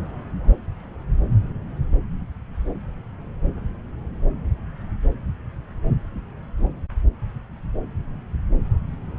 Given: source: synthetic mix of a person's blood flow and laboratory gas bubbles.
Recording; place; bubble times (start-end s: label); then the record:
Doppler ultrasound of blood flow; subclavian vein
no bubbles
From the record:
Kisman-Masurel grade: 000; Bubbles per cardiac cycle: 0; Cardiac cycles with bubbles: 0%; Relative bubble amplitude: no bubbles discernible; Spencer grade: 0 (complete lack of bubble signals)